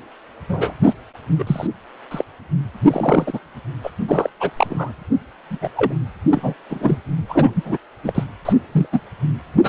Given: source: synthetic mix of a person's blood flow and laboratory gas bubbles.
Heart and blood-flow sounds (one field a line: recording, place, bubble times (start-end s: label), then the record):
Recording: Doppler ultrasound of blood flow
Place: precordium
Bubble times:
0.48-0.74 s: bubbles
0.83-0.93 s: bubbles
1.38-1.67 s: bubbles
2.11-2.24 s: bubbles
2.82-3.39 s: bubbles
3.84-3.90 s: bubbles
4.08-4.29 s: bubbles
4.40-4.50 s: bubbles
4.56-4.92 s: bubbles
5.50-5.58 s: bubbles
5.61-5.69 s: bubbles
5.76-5.92 s: bubbles
6.30-6.54 s: bubbles
6.69-6.98 s: bubbles
7.29-7.77 s: bubbles
8.04-8.24 s: bubbles
8.45-8.53 s: bubbles
8.71-8.87 s: bubbles
8.92-9.01 s: bubbles
9.63-9.69 s: bubbles
From the record:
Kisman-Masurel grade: 242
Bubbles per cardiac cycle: several, 3 to 8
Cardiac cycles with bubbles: 100%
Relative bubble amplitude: moderate (0.250 to 0.450)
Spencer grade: 3 (all of the cardiac periods contain showers or single bubble signals, but not dominating or overriding the cardiac motion signals)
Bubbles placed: anywhere in the cardiac cycle